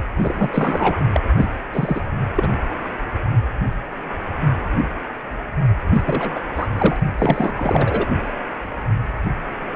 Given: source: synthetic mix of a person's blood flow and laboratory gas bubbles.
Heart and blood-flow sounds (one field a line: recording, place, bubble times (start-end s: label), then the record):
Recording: Doppler ultrasound of blood flow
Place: precordium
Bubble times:
0.16-0.98 s: bubbles
1.12-1.21 s: bubbles
1.37-1.51 s: bubbles
1.74-2.02 s: bubbles
2.36-2.50 s: bubbles
5.86-6.01 s: bubbles
6.05-6.40 s: bubbles
6.54-6.67 s: bubbles
6.78-6.96 s: bubbles
7.18-7.52 s: bubbles
7.56-8.06 s: bubbles
From the record:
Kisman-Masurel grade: 333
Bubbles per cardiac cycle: rolling drumbeat, 9 or more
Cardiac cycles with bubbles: 50 to 99%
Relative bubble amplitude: loud (0.450 to 0.775)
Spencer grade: 3 (all of the cardiac periods contain showers or single bubble signals, but not dominating or overriding the cardiac motion signals)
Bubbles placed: only in the low amplitude regions of the cardiac cycle